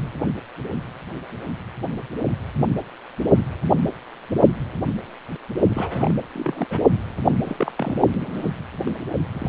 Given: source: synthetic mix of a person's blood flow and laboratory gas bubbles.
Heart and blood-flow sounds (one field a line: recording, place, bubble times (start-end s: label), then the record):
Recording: Doppler ultrasound of blood flow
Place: precordium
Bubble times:
5.70-6.15 s: bubbles
6.34-6.67 s: bubbles
6.70-6.80 s: bubbles
7.26-7.35 s: bubbles
7.45-7.72 s: bubbles
7.78-8.00 s: bubbles
8.20-8.53 s: bubbles
8.85-8.90 s: bubbles
9.32-9.49 s: bubbles
From the record:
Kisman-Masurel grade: 221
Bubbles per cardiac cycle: several, 3 to 8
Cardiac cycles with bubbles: 10 to 50%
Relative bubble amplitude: barely perceptible (0.100 to 0.250)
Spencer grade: 2 (many but less than half of the cardiac periods contain bubble signals, singularly or in groups)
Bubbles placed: only in the low amplitude regions of the cardiac cycle